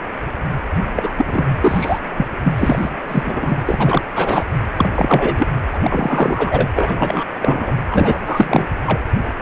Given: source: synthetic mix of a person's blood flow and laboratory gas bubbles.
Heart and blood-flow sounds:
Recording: Doppler ultrasound of blood flow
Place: precordium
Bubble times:
0.95-1.10 s: bubbles
1.18-1.52 s: bubbles
1.60-1.98 s: bubbles
2.17-2.27 s: bubbles
2.45-2.52 s: bubbles
2.56-2.90 s: bubbles
3.08-3.23 s: bubbles
3.26-3.61 s: bubbles
3.65-4.02 s: bubbles
4.14-4.44 s: bubbles
4.76-4.89 s: bubbles
4.95-5.47 s: bubbles
5.73-6.68 s: bubbles
6.76-7.24 s: bubbles
7.41-7.74 s: bubbles
7.91-8.23 s: bubbles
8.26-8.65 s: bubbles
8.86-9.00 s: bubbles
From the record:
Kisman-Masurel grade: 333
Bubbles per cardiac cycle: rolling drumbeat, 9 or more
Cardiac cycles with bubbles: 50 to 99%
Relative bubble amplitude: loud (0.450 to 0.775)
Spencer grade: 3 (all of the cardiac periods contain showers or single bubble signals, but not dominating or overriding the cardiac motion signals)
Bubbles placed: anywhere in the cardiac cycle

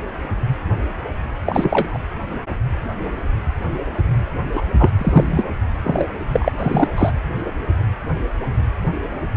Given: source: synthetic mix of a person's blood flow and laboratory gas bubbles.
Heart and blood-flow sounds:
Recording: Doppler ultrasound of blood flow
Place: precordium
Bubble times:
1.46-1.98 s: bubbles
4.53-4.62 s: bubbles
4.78-4.91 s: bubbles
4.97-5.46 s: bubbles
5.83-6.07 s: bubbles
6.33-6.52 s: bubbles
6.59-6.88 s: bubbles
6.96-7.12 s: bubbles
From the record:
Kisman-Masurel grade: 223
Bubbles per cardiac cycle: several, 3 to 8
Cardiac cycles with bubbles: 10 to 50%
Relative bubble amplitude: loud (0.450 to 0.775)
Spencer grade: 2 (many but less than half of the cardiac periods contain bubble signals, singularly or in groups)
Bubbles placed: anywhere in the cardiac cycle

